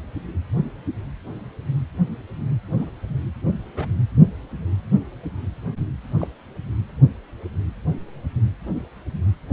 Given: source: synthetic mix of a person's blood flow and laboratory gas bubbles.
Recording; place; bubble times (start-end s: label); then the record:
Doppler ultrasound of blood flow; precordium
2.76-2.90 s: bubbles
3.66-3.71 s: bubbles
3.75-3.88 s: bubbles
6.17-6.27 s: bubbles
From the record:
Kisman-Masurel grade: 121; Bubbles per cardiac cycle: 1 to 2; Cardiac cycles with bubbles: 10 to 50%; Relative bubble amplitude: barely perceptible (0.100 to 0.250); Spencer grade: 2 (many but less than half of the cardiac periods contain bubble signals, singularly or in groups); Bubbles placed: anywhere in the cardiac cycle